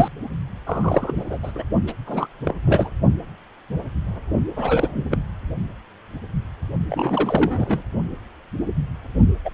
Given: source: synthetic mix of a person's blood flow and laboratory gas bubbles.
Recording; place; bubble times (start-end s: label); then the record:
Doppler ultrasound of blood flow; precordium
0.00-0.08 s: bubbles
0.67-1.12 s: bubbles
1.15-1.38 s: bubbles
1.43-1.51 s: bubbles
1.54-1.64 s: bubbles
1.87-1.93 s: bubbles
2.07-2.27 s: bubbles
2.45-2.55 s: bubbles
2.65-2.91 s: bubbles
4.56-5.17 s: bubbles
6.87-7.83 s: bubbles
9.45-9.50 s: bubbles
From the record:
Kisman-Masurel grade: 332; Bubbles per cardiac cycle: rolling drumbeat, 9 or more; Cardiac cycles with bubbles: 50 to 99%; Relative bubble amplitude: moderate (0.250 to 0.450); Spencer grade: 3 (all of the cardiac periods contain showers or single bubble signals, but not dominating or overriding the cardiac motion signals); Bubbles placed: only in the low amplitude regions of the cardiac cycle